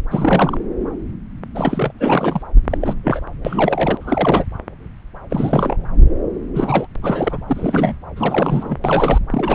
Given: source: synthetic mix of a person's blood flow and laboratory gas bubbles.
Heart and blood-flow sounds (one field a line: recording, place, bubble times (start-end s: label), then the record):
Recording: Doppler ultrasound of blood flow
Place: subclavian vein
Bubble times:
0.10-0.58 s: bubbles
1.54-1.92 s: bubbles
1.99-2.43 s: bubbles
2.70-2.78 s: bubbles
2.81-2.96 s: bubbles
3.03-3.21 s: bubbles
3.45-3.98 s: bubbles
4.00-4.45 s: bubbles
5.30-5.76 s: bubbles
6.54-6.87 s: bubbles
7.02-7.39 s: bubbles
7.48-7.95 s: bubbles
8.16-8.78 s: bubbles
8.84-9.19 s: bubbles
9.30-9.55 s: bubbles
From the record:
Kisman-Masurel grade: 332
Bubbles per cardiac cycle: rolling drumbeat, 9 or more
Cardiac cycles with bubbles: 50 to 99%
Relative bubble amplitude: moderate (0.250 to 0.450)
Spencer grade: 3 (all of the cardiac periods contain showers or single bubble signals, but not dominating or overriding the cardiac motion signals)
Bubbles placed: anywhere in the cardiac cycle